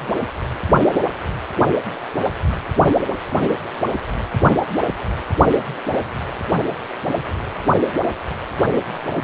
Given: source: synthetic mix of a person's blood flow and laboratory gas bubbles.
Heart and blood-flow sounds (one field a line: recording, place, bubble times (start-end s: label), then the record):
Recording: Doppler ultrasound of blood flow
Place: precordium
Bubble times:
no bubbles
From the record:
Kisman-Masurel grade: 000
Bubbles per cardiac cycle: 0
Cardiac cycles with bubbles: 0%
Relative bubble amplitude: no bubbles discernible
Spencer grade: 0 (complete lack of bubble signals)